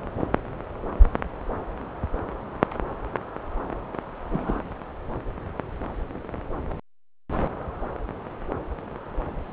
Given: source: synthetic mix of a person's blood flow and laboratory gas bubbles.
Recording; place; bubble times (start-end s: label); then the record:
Doppler ultrasound of blood flow; subclavian vein
4.30-4.62 s: bubbles
From the record:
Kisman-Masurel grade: 112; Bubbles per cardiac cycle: 1 to 2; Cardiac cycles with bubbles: 1 to 10%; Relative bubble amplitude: moderate (0.250 to 0.450); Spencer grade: 1 (occasional bubble signal discernible with the cardiac motion signal, with majority of cardiac periods free of bubbles); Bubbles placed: anywhere in the cardiac cycle